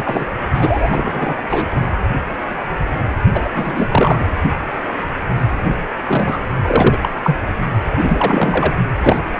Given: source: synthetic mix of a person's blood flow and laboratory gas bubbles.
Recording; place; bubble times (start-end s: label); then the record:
Doppler ultrasound of blood flow; precordium
0.00-0.27 s: bubbles
0.53-1.36 s: bubbles
1.49-1.68 s: bubbles
3.33-4.24 s: bubbles
6.07-6.39 s: bubbles
6.67-6.98 s: bubbles
7.01-7.09 s: bubbles
7.22-7.36 s: bubbles
7.98-8.76 s: bubbles
9.03-9.19 s: bubbles
From the record:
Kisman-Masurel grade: 333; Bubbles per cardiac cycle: rolling drumbeat, 9 or more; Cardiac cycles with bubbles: 50 to 99%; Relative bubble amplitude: loud (0.450 to 0.775); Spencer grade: 3 (all of the cardiac periods contain showers or single bubble signals, but not dominating or overriding the cardiac motion signals); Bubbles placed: only in the low amplitude regions of the cardiac cycle